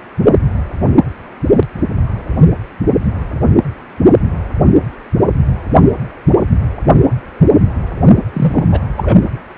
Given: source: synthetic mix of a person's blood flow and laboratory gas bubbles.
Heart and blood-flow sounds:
Doppler ultrasound of blood flow; precordium
8.33-8.66 s: bubbles
8.71-8.80 s: bubbles
8.96-9.18 s: bubbles
From the record:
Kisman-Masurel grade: 213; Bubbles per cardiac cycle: several, 3 to 8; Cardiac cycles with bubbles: 1 to 10%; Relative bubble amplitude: loud (0.450 to 0.775); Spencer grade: 1 (occasional bubble signal discernible with the cardiac motion signal, with majority of cardiac periods free of bubbles); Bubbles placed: only in the low amplitude regions of the cardiac cycle

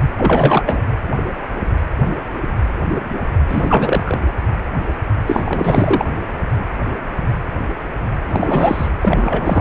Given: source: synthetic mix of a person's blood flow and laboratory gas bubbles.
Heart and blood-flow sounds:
Doppler ultrasound of blood flow; precordium
0.17-0.63 s: bubbles
0.65-0.81 s: bubbles
3.48-4.19 s: bubbles
5.26-6.05 s: bubbles
8.28-8.88 s: bubbles
9.01-9.61 s: bubbles
From the record:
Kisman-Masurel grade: 333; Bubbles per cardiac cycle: rolling drumbeat, 9 or more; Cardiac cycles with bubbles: 50 to 99%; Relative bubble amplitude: loud (0.450 to 0.775); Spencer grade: 3 (all of the cardiac periods contain showers or single bubble signals, but not dominating or overriding the cardiac motion signals); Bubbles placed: anywhere in the cardiac cycle

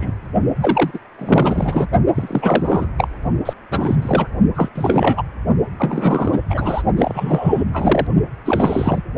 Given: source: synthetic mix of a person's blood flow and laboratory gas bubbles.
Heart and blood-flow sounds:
Doppler ultrasound of blood flow; precordium
0.00-0.11 s: bubbles
0.60-0.91 s: bubbles
0.94-1.00 s: bubbles
1.18-1.87 s: bubbles
2.15-2.91 s: bubbles
2.98-3.08 s: bubbles
3.45-3.53 s: bubbles
3.71-4.28 s: bubbles
4.55-4.68 s: bubbles
4.75-5.22 s: bubbles
5.78-6.39 s: bubbles
6.50-6.83 s: bubbles
6.97-7.63 s: bubbles
7.72-8.07 s: bubbles
8.45-9.02 s: bubbles
From the record:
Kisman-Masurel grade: 343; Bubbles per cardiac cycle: rolling drumbeat, 9 or more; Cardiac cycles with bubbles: 100%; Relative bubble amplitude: loud (0.450 to 0.775); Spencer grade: 3 (all of the cardiac periods contain showers or single bubble signals, but not dominating or overriding the cardiac motion signals); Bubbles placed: only in the low amplitude regions of the cardiac cycle

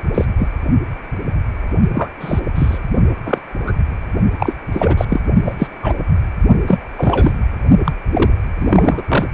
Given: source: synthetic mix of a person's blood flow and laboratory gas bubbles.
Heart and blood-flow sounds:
Doppler ultrasound of blood flow; precordium
0.14-0.25 s: bubbles
0.40-0.48 s: bubbles
1.93-2.10 s: bubbles
2.21-2.40 s: bubbles
2.55-2.78 s: bubbles
3.25-3.38 s: bubbles
3.65-3.72 s: bubbles
4.38-4.53 s: bubbles
4.72-5.05 s: bubbles
5.08-5.20 s: bubbles
5.45-5.54 s: bubbles
5.58-5.67 s: bubbles
5.82-5.94 s: bubbles
6.67-6.78 s: bubbles
6.94-7.36 s: bubbles
7.84-7.92 s: bubbles
8.13-8.31 s: bubbles
8.58-9.02 s: bubbles
9.08-9.26 s: bubbles
From the record:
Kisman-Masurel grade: 233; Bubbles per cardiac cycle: several, 3 to 8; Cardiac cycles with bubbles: 50 to 99%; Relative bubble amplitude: loud (0.450 to 0.775); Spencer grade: 3 (all of the cardiac periods contain showers or single bubble signals, but not dominating or overriding the cardiac motion signals); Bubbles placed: only in the low amplitude regions of the cardiac cycle

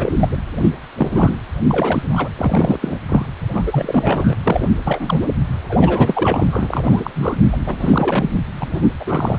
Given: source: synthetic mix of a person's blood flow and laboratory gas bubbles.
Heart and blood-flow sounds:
Doppler ultrasound of blood flow; precordium
0.00-0.28 s: bubbles
0.31-0.37 s: bubbles
0.61-0.70 s: bubbles
0.96-1.36 s: bubbles
1.65-2.02 s: bubbles
2.12-2.29 s: bubbles
2.37-2.98 s: bubbles
3.08-3.25 s: bubbles
3.48-4.36 s: bubbles
4.45-4.69 s: bubbles
4.84-5.29 s: bubbles
5.69-7.38 s: bubbles
7.53-7.57 s: bubbles
7.65-8.47 s: bubbles
8.59-8.90 s: bubbles
8.99-9.39 s: bubbles
From the record:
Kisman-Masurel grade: 343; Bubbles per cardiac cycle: rolling drumbeat, 9 or more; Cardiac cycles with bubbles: 100%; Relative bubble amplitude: loud (0.450 to 0.775); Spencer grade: 3 (all of the cardiac periods contain showers or single bubble signals, but not dominating or overriding the cardiac motion signals); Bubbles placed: anywhere in the cardiac cycle

